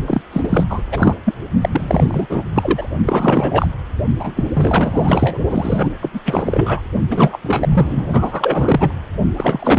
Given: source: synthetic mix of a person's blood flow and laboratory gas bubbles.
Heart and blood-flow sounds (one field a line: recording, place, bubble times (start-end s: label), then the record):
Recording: Doppler ultrasound of blood flow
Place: precordium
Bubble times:
0.06-0.21 s: bubbles
0.33-0.64 s: bubbles
0.69-0.81 s: bubbles
0.91-1.15 s: bubbles
1.25-1.35 s: bubbles
1.61-2.42 s: bubbles
2.54-2.92 s: bubbles
3.05-3.67 s: bubbles
4.19-4.44 s: bubbles
4.53-5.39 s: bubbles
5.50-5.90 s: bubbles
6.02-6.10 s: bubbles
6.14-6.21 s: bubbles
6.25-6.82 s: bubbles
7.09-7.39 s: bubbles
7.42-8.06 s: bubbles
8.12-8.92 s: bubbles
9.37-9.79 s: bubbles
From the record:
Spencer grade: 4 (maximum detectable bubble signal sounding continuously throughout systole and diastole of every cardiac period, and overriding the amplitude of the normal cardiac signals)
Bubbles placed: only in the low amplitude regions of the cardiac cycle